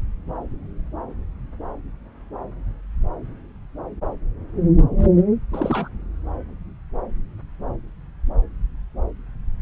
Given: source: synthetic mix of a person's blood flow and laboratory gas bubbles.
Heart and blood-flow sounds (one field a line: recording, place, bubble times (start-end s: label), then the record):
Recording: Doppler ultrasound of blood flow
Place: subclavian vein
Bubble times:
5.53-5.89 s: bubbles
From the record:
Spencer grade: 1 (occasional bubble signal discernible with the cardiac motion signal, with majority of cardiac periods free of bubbles)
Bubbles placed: anywhere in the cardiac cycle